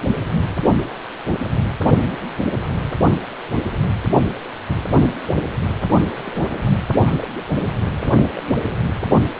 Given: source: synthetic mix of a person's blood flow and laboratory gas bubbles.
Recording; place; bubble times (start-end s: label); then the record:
Doppler ultrasound of blood flow; precordium
6.17-6.21 s: bubbles
6.25-6.80 s: bubbles
7.05-7.16 s: bubbles
7.18-7.28 s: bubbles
7.90-7.92 s: bubbles
7.97-8.27 s: bubbles
8.36-8.43 s: bubbles
8.61-8.73 s: bubbles
From the record:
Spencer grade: 2 (many but less than half of the cardiac periods contain bubble signals, singularly or in groups); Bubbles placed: only in the low amplitude regions of the cardiac cycle